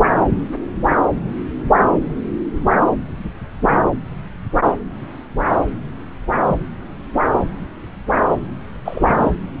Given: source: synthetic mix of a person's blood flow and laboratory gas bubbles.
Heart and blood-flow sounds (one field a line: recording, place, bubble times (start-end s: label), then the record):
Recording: Doppler ultrasound of blood flow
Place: subclavian vein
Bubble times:
8.85-9.30 s: bubbles
From the record:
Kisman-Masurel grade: 112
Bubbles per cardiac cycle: 1 to 2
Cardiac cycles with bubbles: 1 to 10%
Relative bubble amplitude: moderate (0.250 to 0.450)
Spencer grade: 1 (occasional bubble signal discernible with the cardiac motion signal, with majority of cardiac periods free of bubbles)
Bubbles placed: anywhere in the cardiac cycle